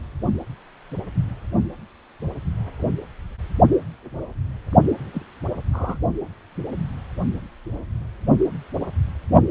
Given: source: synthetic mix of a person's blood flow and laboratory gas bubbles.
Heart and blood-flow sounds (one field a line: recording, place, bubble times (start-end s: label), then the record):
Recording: Doppler ultrasound of blood flow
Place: precordium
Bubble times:
5.13-5.22 s: bubbles
5.72-5.97 s: bubbles
From the record:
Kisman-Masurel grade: 111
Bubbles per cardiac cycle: 1 to 2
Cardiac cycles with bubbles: 1 to 10%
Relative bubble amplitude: barely perceptible (0.100 to 0.250)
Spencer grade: 1 (occasional bubble signal discernible with the cardiac motion signal, with majority of cardiac periods free of bubbles)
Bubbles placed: only in the low amplitude regions of the cardiac cycle